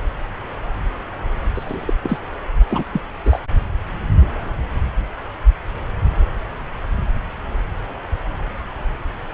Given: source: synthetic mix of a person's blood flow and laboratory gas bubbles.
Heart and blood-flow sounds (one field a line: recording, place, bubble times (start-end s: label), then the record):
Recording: Doppler ultrasound of blood flow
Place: subclavian vein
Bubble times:
1.54-1.94 s: bubbles
2.02-2.20 s: bubbles
2.68-2.83 s: bubbles
2.92-3.01 s: bubbles
3.25-3.42 s: bubbles
From the record:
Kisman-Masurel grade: 222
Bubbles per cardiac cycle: several, 3 to 8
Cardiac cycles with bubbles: 10 to 50%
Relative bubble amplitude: moderate (0.250 to 0.450)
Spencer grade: 2 (many but less than half of the cardiac periods contain bubble signals, singularly or in groups)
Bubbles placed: anywhere in the cardiac cycle